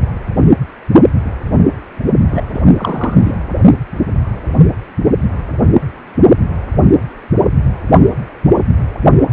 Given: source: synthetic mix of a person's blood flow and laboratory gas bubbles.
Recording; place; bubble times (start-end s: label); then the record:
Doppler ultrasound of blood flow; precordium
2.31-2.42 s: bubbles
2.52-2.61 s: bubbles
2.77-3.35 s: bubbles
From the record:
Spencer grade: 2 (many but less than half of the cardiac periods contain bubble signals, singularly or in groups); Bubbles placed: only in the low amplitude regions of the cardiac cycle